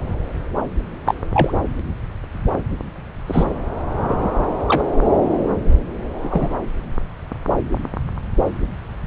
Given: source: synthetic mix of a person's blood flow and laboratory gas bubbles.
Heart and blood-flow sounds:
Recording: Doppler ultrasound of blood flow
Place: subclavian vein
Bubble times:
1.06-1.15 s: bubbles
1.32-1.57 s: bubbles
3.27-3.46 s: bubbles
3.92-4.32 s: bubbles
4.68-4.83 s: bubbles
6.22-6.52 s: bubbles
From the record:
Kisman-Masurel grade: 123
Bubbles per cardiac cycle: 1 to 2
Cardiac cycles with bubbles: 10 to 50%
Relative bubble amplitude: loud (0.450 to 0.775)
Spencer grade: 2 (many but less than half of the cardiac periods contain bubble signals, singularly or in groups)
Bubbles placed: anywhere in the cardiac cycle

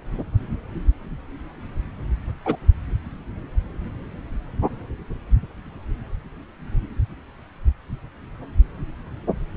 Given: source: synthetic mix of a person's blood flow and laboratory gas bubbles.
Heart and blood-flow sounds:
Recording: Doppler ultrasound of blood flow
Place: subclavian vein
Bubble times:
2.45-2.57 s: bubbles
From the record:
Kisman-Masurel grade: 113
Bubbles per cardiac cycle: 1 to 2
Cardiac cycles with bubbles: 1 to 10%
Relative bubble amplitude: loud (0.450 to 0.775)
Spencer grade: 1 (occasional bubble signal discernible with the cardiac motion signal, with majority of cardiac periods free of bubbles)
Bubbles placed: anywhere in the cardiac cycle

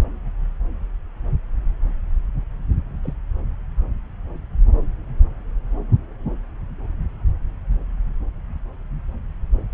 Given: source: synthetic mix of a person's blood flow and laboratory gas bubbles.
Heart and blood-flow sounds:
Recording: Doppler ultrasound of blood flow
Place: subclavian vein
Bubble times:
3.03-3.13 s: bubbles
From the record:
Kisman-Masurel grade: 111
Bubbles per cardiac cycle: 1 to 2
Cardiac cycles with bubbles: 1 to 10%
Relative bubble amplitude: barely perceptible (0.100 to 0.250)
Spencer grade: 1 (occasional bubble signal discernible with the cardiac motion signal, with majority of cardiac periods free of bubbles)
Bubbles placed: anywhere in the cardiac cycle

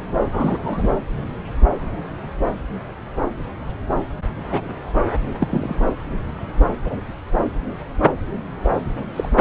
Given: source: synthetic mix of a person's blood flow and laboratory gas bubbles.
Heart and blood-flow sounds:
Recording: Doppler ultrasound of blood flow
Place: subclavian vein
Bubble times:
0.31-0.90 s: bubbles
4.50-4.74 s: bubbles
5.39-5.76 s: bubbles
6.84-6.97 s: bubbles
8.63-8.71 s: bubbles
9.16-9.29 s: bubbles
From the record:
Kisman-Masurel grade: 122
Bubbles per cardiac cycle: 1 to 2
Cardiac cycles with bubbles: 10 to 50%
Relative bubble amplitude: moderate (0.250 to 0.450)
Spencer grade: 2 (many but less than half of the cardiac periods contain bubble signals, singularly or in groups)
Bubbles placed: anywhere in the cardiac cycle

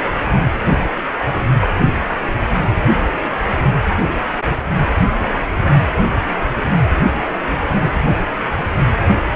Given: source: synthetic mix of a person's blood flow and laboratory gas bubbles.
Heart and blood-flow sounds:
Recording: Doppler ultrasound of blood flow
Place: precordium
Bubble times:
7.02-7.25 s: bubbles
7.54-7.63 s: bubbles
From the record:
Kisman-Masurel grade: 211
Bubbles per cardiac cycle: several, 3 to 8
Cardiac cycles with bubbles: 1 to 10%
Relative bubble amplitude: barely perceptible (0.100 to 0.250)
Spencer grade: 1 (occasional bubble signal discernible with the cardiac motion signal, with majority of cardiac periods free of bubbles)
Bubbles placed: anywhere in the cardiac cycle

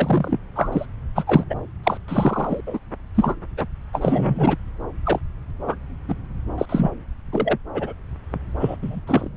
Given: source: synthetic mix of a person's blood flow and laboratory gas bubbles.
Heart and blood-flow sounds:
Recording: Doppler ultrasound of blood flow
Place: subclavian vein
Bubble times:
0.00-0.40 s: bubbles
0.55-0.85 s: bubbles
1.15-1.24 s: bubbles
1.27-1.44 s: bubbles
1.50-1.55 s: bubbles
1.83-1.98 s: bubbles
2.08-2.60 s: bubbles
2.67-2.79 s: bubbles
3.15-3.35 s: bubbles
3.57-3.67 s: bubbles
3.93-4.56 s: bubbles
5.04-5.20 s: bubbles
5.67-5.76 s: bubbles
6.08-6.15 s: bubbles
6.58-6.66 s: bubbles
6.69-6.90 s: bubbles
7.32-7.58 s: bubbles
7.74-7.93 s: bubbles
8.60-8.76 s: bubbles
8.81-9.01 s: bubbles
9.07-9.29 s: bubbles
From the record:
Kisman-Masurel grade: 243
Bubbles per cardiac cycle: several, 3 to 8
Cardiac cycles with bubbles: 100%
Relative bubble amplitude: loud (0.450 to 0.775)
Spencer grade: 3 (all of the cardiac periods contain showers or single bubble signals, but not dominating or overriding the cardiac motion signals)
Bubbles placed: anywhere in the cardiac cycle

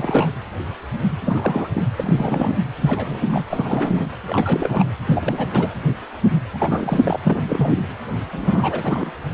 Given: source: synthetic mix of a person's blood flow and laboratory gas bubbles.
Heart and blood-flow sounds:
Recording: Doppler ultrasound of blood flow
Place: precordium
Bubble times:
0.00-0.32 s: bubbles
1.25-1.71 s: bubbles
1.73-1.85 s: bubbles
1.96-2.56 s: bubbles
2.81-3.44 s: bubbles
3.50-4.04 s: bubbles
4.27-4.84 s: bubbles
5.06-5.69 s: bubbles
6.53-7.19 s: bubbles
7.23-7.82 s: bubbles
8.32-9.12 s: bubbles
From the record:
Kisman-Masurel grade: 332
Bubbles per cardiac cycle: rolling drumbeat, 9 or more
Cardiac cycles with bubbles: 50 to 99%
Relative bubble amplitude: moderate (0.250 to 0.450)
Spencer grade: 3 (all of the cardiac periods contain showers or single bubble signals, but not dominating or overriding the cardiac motion signals)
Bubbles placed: anywhere in the cardiac cycle

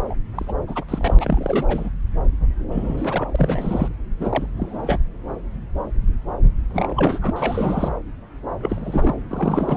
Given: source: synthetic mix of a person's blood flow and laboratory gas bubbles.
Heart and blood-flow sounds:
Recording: Doppler ultrasound of blood flow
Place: subclavian vein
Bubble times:
0.00-0.15 s: bubbles
0.35-0.53 s: bubbles
0.68-0.84 s: bubbles
0.88-1.90 s: bubbles
2.71-3.88 s: bubbles
4.20-4.46 s: bubbles
4.57-4.98 s: bubbles
6.70-7.93 s: bubbles
8.61-9.14 s: bubbles
9.27-9.77 s: bubbles
From the record:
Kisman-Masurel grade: 332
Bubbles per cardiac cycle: rolling drumbeat, 9 or more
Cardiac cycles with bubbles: 50 to 99%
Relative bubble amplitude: moderate (0.250 to 0.450)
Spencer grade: 3 (all of the cardiac periods contain showers or single bubble signals, but not dominating or overriding the cardiac motion signals)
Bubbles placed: anywhere in the cardiac cycle

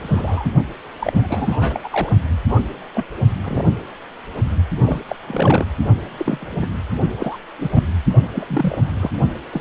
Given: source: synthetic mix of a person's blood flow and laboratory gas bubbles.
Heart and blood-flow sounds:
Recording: Doppler ultrasound of blood flow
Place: precordium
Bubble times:
0.00-0.52 s: bubbles
0.99-1.13 s: bubbles
1.16-1.80 s: bubbles
1.84-1.89 s: bubbles
1.92-2.10 s: bubbles
2.48-2.62 s: bubbles
2.95-3.04 s: bubbles
3.43-3.64 s: bubbles
4.80-5.00 s: bubbles
5.08-5.16 s: bubbles
5.27-5.64 s: bubbles
6.17-6.67 s: bubbles
7.17-7.38 s: bubbles
7.58-7.69 s: bubbles
7.74-7.83 s: bubbles
8.35-8.78 s: bubbles
8.99-9.11 s: bubbles
9.51-9.61 s: bubbles
From the record:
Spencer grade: 3 (all of the cardiac periods contain showers or single bubble signals, but not dominating or overriding the cardiac motion signals)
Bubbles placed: only in the low amplitude regions of the cardiac cycle

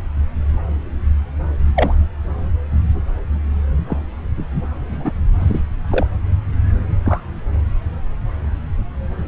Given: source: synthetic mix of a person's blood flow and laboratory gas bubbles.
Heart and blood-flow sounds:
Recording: Doppler ultrasound of blood flow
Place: subclavian vein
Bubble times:
1.76-1.96 s: bubbles
3.88-3.97 s: bubbles
4.80-5.12 s: bubbles
5.40-5.62 s: bubbles
5.90-6.06 s: bubbles
7.05-7.22 s: bubbles
From the record:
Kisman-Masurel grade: 122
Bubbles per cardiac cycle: 1 to 2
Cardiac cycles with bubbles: 10 to 50%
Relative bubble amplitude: moderate (0.250 to 0.450)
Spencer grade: 2 (many but less than half of the cardiac periods contain bubble signals, singularly or in groups)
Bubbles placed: anywhere in the cardiac cycle

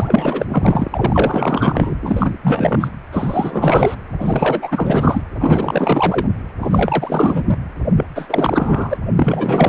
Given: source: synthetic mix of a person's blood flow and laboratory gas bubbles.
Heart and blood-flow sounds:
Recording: Doppler ultrasound of blood flow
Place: precordium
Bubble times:
0.00-0.45 s: bubbles
0.48-1.95 s: bubbles
2.02-2.31 s: bubbles
2.43-2.91 s: bubbles
3.12-3.96 s: bubbles
4.20-5.22 s: bubbles
5.39-6.27 s: bubbles
6.61-7.59 s: bubbles
7.97-8.04 s: bubbles
8.15-8.96 s: bubbles
9.16-9.69 s: bubbles
From the record:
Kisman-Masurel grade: 444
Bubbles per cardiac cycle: continuous sound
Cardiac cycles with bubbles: 100%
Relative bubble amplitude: maximal (0.775 to 0.999)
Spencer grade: 4 (maximum detectable bubble signal sounding continuously throughout systole and diastole of every cardiac period, and overriding the amplitude of the normal cardiac signals)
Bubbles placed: anywhere in the cardiac cycle

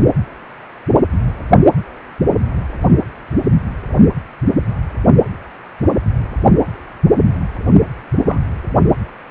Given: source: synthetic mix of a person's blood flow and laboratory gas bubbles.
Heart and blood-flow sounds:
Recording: Doppler ultrasound of blood flow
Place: precordium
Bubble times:
8.24-8.40 s: bubbles
From the record:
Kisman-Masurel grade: 112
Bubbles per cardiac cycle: 1 to 2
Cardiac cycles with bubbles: 1 to 10%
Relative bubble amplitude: moderate (0.250 to 0.450)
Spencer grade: 1 (occasional bubble signal discernible with the cardiac motion signal, with majority of cardiac periods free of bubbles)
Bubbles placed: only in the low amplitude regions of the cardiac cycle

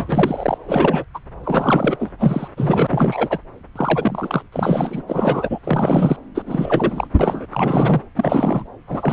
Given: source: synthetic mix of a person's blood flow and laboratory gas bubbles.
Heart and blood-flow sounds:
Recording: Doppler ultrasound of blood flow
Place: subclavian vein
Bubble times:
0.00-0.57 s: bubbles
0.67-1.04 s: bubbles
1.14-1.19 s: bubbles
1.44-1.97 s: bubbles
2.00-2.10 s: bubbles
2.19-2.48 s: bubbles
2.56-3.39 s: bubbles
3.76-4.43 s: bubbles
4.52-5.02 s: bubbles
5.07-5.59 s: bubbles
5.63-6.16 s: bubbles
6.35-6.43 s: bubbles
6.47-7.07 s: bubbles
7.19-7.46 s: bubbles
7.52-8.01 s: bubbles
8.15-8.65 s: bubbles
8.87-9.13 s: bubbles
From the record:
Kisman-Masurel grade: 343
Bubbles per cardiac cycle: rolling drumbeat, 9 or more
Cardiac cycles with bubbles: 100%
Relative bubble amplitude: loud (0.450 to 0.775)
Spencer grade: 3 (all of the cardiac periods contain showers or single bubble signals, but not dominating or overriding the cardiac motion signals)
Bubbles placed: anywhere in the cardiac cycle

